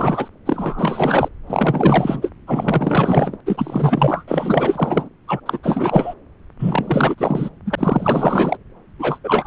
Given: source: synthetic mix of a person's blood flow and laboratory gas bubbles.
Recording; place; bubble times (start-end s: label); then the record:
Doppler ultrasound of blood flow; subclavian vein
0.00-0.29 s: bubbles
0.46-1.28 s: bubbles
1.46-2.31 s: bubbles
2.47-3.38 s: bubbles
3.46-4.24 s: bubbles
4.27-5.09 s: bubbles
5.28-5.40 s: bubbles
5.46-5.58 s: bubbles
5.63-6.14 s: bubbles
6.59-7.15 s: bubbles
7.18-7.50 s: bubbles
7.65-8.57 s: bubbles
8.99-9.19 s: bubbles
9.24-9.47 s: bubbles
From the record:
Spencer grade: 4 (maximum detectable bubble signal sounding continuously throughout systole and diastole of every cardiac period, and overriding the amplitude of the normal cardiac signals); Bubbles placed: anywhere in the cardiac cycle